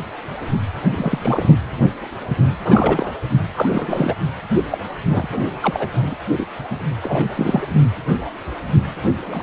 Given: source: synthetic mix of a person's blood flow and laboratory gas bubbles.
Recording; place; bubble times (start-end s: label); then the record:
Doppler ultrasound of blood flow; precordium
0.93-1.54 s: bubbles
2.64-3.13 s: bubbles
3.53-4.15 s: bubbles
4.70-4.78 s: bubbles
5.04-5.07 s: bubbles
5.10-5.52 s: bubbles
5.62-5.88 s: bubbles
5.93-6.16 s: bubbles
6.37-6.46 s: bubbles
6.70-6.84 s: bubbles
7.03-7.29 s: bubbles
7.34-7.67 s: bubbles
9.27-9.43 s: bubbles
From the record:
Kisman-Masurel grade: 232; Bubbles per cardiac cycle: several, 3 to 8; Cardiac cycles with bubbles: 50 to 99%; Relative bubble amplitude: moderate (0.250 to 0.450); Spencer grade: 3 (all of the cardiac periods contain showers or single bubble signals, but not dominating or overriding the cardiac motion signals); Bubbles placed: anywhere in the cardiac cycle